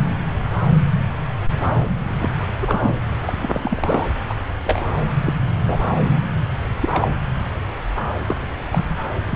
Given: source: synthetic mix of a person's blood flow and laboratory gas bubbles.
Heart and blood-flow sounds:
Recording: Doppler ultrasound of blood flow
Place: subclavian vein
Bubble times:
2.19-2.28 s: bubbles
2.61-2.94 s: bubbles
3.22-3.33 s: bubbles
3.42-3.48 s: bubbles
3.53-4.08 s: bubbles
4.29-4.33 s: bubbles
4.64-4.82 s: bubbles
5.25-5.34 s: bubbles
5.68-5.77 s: bubbles
6.82-6.89 s: bubbles
6.91-7.08 s: bubbles
8.27-8.35 s: bubbles
8.72-8.96 s: bubbles
9.27-9.36 s: bubbles
From the record:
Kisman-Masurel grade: 232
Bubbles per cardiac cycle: several, 3 to 8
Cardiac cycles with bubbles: 50 to 99%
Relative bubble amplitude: moderate (0.250 to 0.450)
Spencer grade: 3 (all of the cardiac periods contain showers or single bubble signals, but not dominating or overriding the cardiac motion signals)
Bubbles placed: anywhere in the cardiac cycle

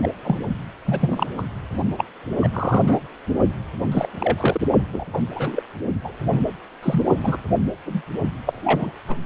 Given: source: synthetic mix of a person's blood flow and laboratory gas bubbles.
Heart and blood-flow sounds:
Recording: Doppler ultrasound of blood flow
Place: precordium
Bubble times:
0.03-0.08 s: bubbles
0.23-0.38 s: bubbles
0.84-1.26 s: bubbles
1.37-1.43 s: bubbles
1.98-2.05 s: bubbles
2.40-2.49 s: bubbles
2.53-2.99 s: bubbles
3.92-4.09 s: bubbles
4.20-4.61 s: bubbles
4.92-5.05 s: bubbles
5.13-5.18 s: bubbles
5.36-5.63 s: bubbles
6.04-6.12 s: bubbles
6.24-6.43 s: bubbles
6.83-7.05 s: bubbles
7.23-7.38 s: bubbles
7.86-8.02 s: bubbles
8.46-8.90 s: bubbles
9.09-9.16 s: bubbles
From the record:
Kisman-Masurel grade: 242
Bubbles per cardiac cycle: several, 3 to 8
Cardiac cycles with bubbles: 100%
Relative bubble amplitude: moderate (0.250 to 0.450)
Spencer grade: 3 (all of the cardiac periods contain showers or single bubble signals, but not dominating or overriding the cardiac motion signals)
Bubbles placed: only in the low amplitude regions of the cardiac cycle

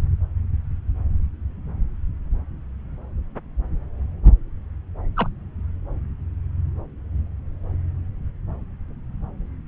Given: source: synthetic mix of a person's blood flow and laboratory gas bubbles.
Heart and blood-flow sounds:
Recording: Doppler ultrasound of blood flow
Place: subclavian vein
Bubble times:
5.16-5.29 s: bubbles
From the record:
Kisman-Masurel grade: 112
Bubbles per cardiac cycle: 1 to 2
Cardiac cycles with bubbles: 1 to 10%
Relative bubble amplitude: moderate (0.250 to 0.450)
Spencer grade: 1 (occasional bubble signal discernible with the cardiac motion signal, with majority of cardiac periods free of bubbles)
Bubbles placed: anywhere in the cardiac cycle

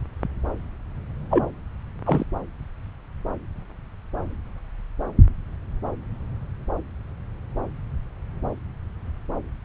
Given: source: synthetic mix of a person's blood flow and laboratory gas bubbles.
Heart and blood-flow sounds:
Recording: Doppler ultrasound of blood flow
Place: subclavian vein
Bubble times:
1.30-1.46 s: bubbles
2.06-2.24 s: bubbles
From the record:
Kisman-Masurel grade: 212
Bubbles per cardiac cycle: several, 3 to 8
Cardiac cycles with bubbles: 1 to 10%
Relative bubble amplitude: moderate (0.250 to 0.450)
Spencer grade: 1 (occasional bubble signal discernible with the cardiac motion signal, with majority of cardiac periods free of bubbles)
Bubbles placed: anywhere in the cardiac cycle

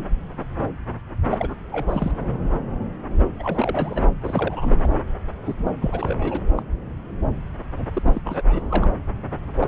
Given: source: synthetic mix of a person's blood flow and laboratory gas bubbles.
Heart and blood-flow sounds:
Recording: Doppler ultrasound of blood flow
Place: subclavian vein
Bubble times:
1.30-1.56 s: bubbles
1.71-2.11 s: bubbles
3.39-4.04 s: bubbles
4.21-4.95 s: bubbles
5.46-5.54 s: bubbles
5.58-5.72 s: bubbles
5.81-6.41 s: bubbles
6.57-6.62 s: bubbles
7.76-7.86 s: bubbles
7.94-8.02 s: bubbles
8.04-8.21 s: bubbles
8.25-8.90 s: bubbles
9.60-9.68 s: bubbles
From the record:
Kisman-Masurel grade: 332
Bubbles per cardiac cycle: rolling drumbeat, 9 or more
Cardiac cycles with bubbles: 50 to 99%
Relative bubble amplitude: moderate (0.250 to 0.450)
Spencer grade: 3 (all of the cardiac periods contain showers or single bubble signals, but not dominating or overriding the cardiac motion signals)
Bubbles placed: anywhere in the cardiac cycle

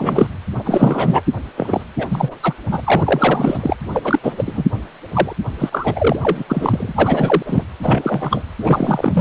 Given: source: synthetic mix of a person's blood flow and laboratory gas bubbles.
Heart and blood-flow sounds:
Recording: Doppler ultrasound of blood flow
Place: precordium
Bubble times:
0.00-0.27 s: bubbles
0.59-1.21 s: bubbles
1.56-1.84 s: bubbles
1.97-2.35 s: bubbles
2.43-2.53 s: bubbles
2.71-2.81 s: bubbles
2.83-3.77 s: bubbles
3.92-4.01 s: bubbles
4.04-4.19 s: bubbles
4.23-4.65 s: bubbles
5.13-5.33 s: bubbles
5.58-6.19 s: bubbles
6.23-6.44 s: bubbles
6.48-6.92 s: bubbles
6.96-7.42 s: bubbles
7.46-7.63 s: bubbles
7.82-8.44 s: bubbles
8.61-9.21 s: bubbles
From the record:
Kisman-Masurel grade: 333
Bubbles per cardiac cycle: rolling drumbeat, 9 or more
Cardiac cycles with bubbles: 50 to 99%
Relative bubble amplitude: loud (0.450 to 0.775)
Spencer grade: 3 (all of the cardiac periods contain showers or single bubble signals, but not dominating or overriding the cardiac motion signals)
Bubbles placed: anywhere in the cardiac cycle

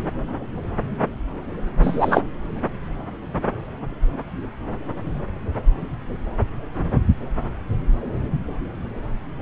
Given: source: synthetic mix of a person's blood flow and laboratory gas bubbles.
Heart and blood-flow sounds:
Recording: Doppler ultrasound of blood flow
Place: subclavian vein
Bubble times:
1.81-2.23 s: bubbles
From the record:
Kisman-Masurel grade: 113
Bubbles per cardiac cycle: 1 to 2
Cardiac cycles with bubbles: 1 to 10%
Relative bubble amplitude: loud (0.450 to 0.775)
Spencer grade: 1 (occasional bubble signal discernible with the cardiac motion signal, with majority of cardiac periods free of bubbles)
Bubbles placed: anywhere in the cardiac cycle

